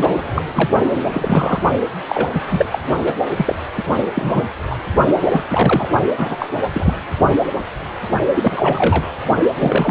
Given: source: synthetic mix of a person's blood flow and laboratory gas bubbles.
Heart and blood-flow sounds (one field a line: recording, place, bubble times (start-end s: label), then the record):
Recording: Doppler ultrasound of blood flow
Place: precordium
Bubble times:
0.00-0.23 s: bubbles
0.34-0.42 s: bubbles
0.55-0.69 s: bubbles
1.10-1.62 s: bubbles
2.08-2.29 s: bubbles
2.34-2.41 s: bubbles
2.49-2.66 s: bubbles
2.71-2.79 s: bubbles
3.04-3.13 s: bubbles
3.36-3.56 s: bubbles
3.75-3.83 s: bubbles
4.15-4.45 s: bubbles
4.70-4.76 s: bubbles
5.24-5.44 s: bubbles
5.49-5.89 s: bubbles
6.17-6.48 s: bubbles
6.73-6.94 s: bubbles
8.35-9.10 s: bubbles
9.56-9.90 s: bubbles
From the record:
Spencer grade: 3 (all of the cardiac periods contain showers or single bubble signals, but not dominating or overriding the cardiac motion signals)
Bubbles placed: only in the low amplitude regions of the cardiac cycle